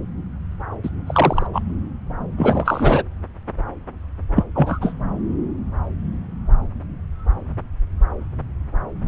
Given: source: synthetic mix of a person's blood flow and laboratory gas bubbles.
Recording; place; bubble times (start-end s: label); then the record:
Doppler ultrasound of blood flow; subclavian vein
0.83-0.90 s: bubbles
1.06-1.47 s: bubbles
1.53-1.62 s: bubbles
2.37-3.02 s: bubbles
4.35-4.44 s: bubbles
4.54-4.94 s: bubbles
From the record:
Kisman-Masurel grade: 223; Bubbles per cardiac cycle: several, 3 to 8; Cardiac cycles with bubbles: 10 to 50%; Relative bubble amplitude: loud (0.450 to 0.775); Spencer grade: 2 (many but less than half of the cardiac periods contain bubble signals, singularly or in groups); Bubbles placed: anywhere in the cardiac cycle